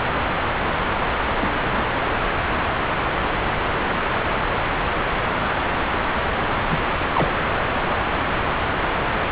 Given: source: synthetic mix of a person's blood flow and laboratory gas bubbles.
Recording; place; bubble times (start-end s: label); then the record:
Doppler ultrasound of blood flow; subclavian vein
1.41-1.97 s: bubbles
6.71-6.77 s: bubbles
7.13-7.34 s: bubbles
From the record:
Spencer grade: 2 (many but less than half of the cardiac periods contain bubble signals, singularly or in groups); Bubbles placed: anywhere in the cardiac cycle